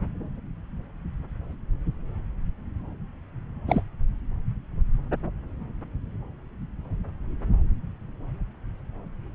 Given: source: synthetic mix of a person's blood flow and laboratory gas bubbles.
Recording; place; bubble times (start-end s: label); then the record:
Doppler ultrasound of blood flow; subclavian vein
3.67-3.84 s: bubbles
From the record:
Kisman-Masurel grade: 222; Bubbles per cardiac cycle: several, 3 to 8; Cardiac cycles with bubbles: 10 to 50%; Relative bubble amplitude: moderate (0.250 to 0.450); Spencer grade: 2 (many but less than half of the cardiac periods contain bubble signals, singularly or in groups); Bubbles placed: anywhere in the cardiac cycle